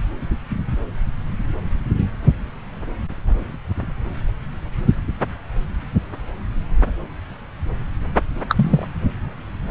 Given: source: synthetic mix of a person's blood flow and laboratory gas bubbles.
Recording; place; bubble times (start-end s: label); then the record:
Doppler ultrasound of blood flow; subclavian vein
8.49-8.88 s: bubbles
From the record:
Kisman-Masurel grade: 113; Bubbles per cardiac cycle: 1 to 2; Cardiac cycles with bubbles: 1 to 10%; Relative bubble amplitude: loud (0.450 to 0.775); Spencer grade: 1 (occasional bubble signal discernible with the cardiac motion signal, with majority of cardiac periods free of bubbles); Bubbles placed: anywhere in the cardiac cycle